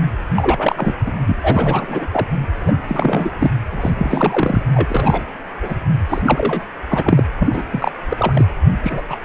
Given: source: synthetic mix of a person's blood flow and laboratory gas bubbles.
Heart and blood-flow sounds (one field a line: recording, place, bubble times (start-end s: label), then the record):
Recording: Doppler ultrasound of blood flow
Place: precordium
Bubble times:
0.34-0.94 s: bubbles
1.05-1.11 s: bubbles
1.26-1.37 s: bubbles
1.43-2.07 s: bubbles
2.12-2.26 s: bubbles
2.61-2.85 s: bubbles
2.88-3.31 s: bubbles
3.38-3.50 s: bubbles
3.71-3.91 s: bubbles
3.96-4.62 s: bubbles
4.74-5.23 s: bubbles
5.62-5.75 s: bubbles
6.09-6.21 s: bubbles
6.26-6.62 s: bubbles
6.90-7.24 s: bubbles
7.39-7.63 s: bubbles
7.71-7.92 s: bubbles
8.09-8.45 s: bubbles
8.83-9.02 s: bubbles
9.10-9.16 s: bubbles
From the record:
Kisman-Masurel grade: 343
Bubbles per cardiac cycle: rolling drumbeat, 9 or more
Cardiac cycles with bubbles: 100%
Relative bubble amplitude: loud (0.450 to 0.775)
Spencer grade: 3 (all of the cardiac periods contain showers or single bubble signals, but not dominating or overriding the cardiac motion signals)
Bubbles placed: anywhere in the cardiac cycle